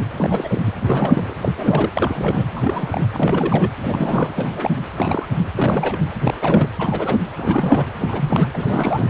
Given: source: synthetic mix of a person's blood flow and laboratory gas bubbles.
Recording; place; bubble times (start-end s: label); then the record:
Doppler ultrasound of blood flow; precordium
0.00-0.04 s: bubbles
0.17-0.61 s: bubbles
0.66-0.73 s: bubbles
0.82-1.34 s: bubbles
1.42-1.52 s: bubbles
1.57-1.91 s: bubbles
1.95-2.43 s: bubbles
2.54-3.07 s: bubbles
3.13-3.71 s: bubbles
3.79-4.86 s: bubbles
4.93-5.26 s: bubbles
5.55-5.98 s: bubbles
6.23-6.34 s: bubbles
6.41-6.67 s: bubbles
6.79-7.17 s: bubbles
7.35-7.86 s: bubbles
7.99-8.47 s: bubbles
8.54-9.08 s: bubbles
From the record:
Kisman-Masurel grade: 342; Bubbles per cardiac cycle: rolling drumbeat, 9 or more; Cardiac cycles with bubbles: 100%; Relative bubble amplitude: moderate (0.250 to 0.450); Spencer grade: 3 (all of the cardiac periods contain showers or single bubble signals, but not dominating or overriding the cardiac motion signals); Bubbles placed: anywhere in the cardiac cycle